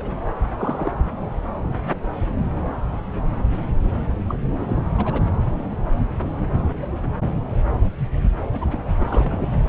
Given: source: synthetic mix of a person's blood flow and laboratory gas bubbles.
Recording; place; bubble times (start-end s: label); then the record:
Doppler ultrasound of blood flow; subclavian vein
0.00-0.12 s: bubbles
0.57-0.92 s: bubbles
4.27-4.35 s: bubbles
4.60-4.79 s: bubbles
4.97-5.23 s: bubbles
8.53-8.58 s: bubbles
8.61-8.65 s: bubbles
8.71-8.79 s: bubbles
9.00-9.49 s: bubbles
From the record:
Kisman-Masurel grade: 221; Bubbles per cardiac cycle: several, 3 to 8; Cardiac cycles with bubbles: 10 to 50%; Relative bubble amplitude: barely perceptible (0.100 to 0.250); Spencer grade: 2 (many but less than half of the cardiac periods contain bubble signals, singularly or in groups); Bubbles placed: anywhere in the cardiac cycle